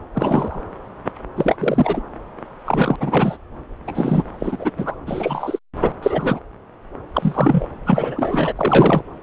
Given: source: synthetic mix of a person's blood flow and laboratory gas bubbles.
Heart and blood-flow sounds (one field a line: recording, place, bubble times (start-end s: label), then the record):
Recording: Doppler ultrasound of blood flow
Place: subclavian vein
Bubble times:
0.15-0.59 s: bubbles
1.36-1.56 s: bubbles
1.58-2.02 s: bubbles
2.66-2.96 s: bubbles
3.00-3.37 s: bubbles
3.87-4.24 s: bubbles
4.39-4.70 s: bubbles
4.77-4.96 s: bubbles
5.06-5.59 s: bubbles
5.81-5.92 s: bubbles
6.02-6.40 s: bubbles
7.14-7.66 s: bubbles
7.86-8.53 s: bubbles
8.55-9.01 s: bubbles
From the record:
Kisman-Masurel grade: 233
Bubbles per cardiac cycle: several, 3 to 8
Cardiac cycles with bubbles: 50 to 99%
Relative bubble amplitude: loud (0.450 to 0.775)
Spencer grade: 3 (all of the cardiac periods contain showers or single bubble signals, but not dominating or overriding the cardiac motion signals)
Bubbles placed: anywhere in the cardiac cycle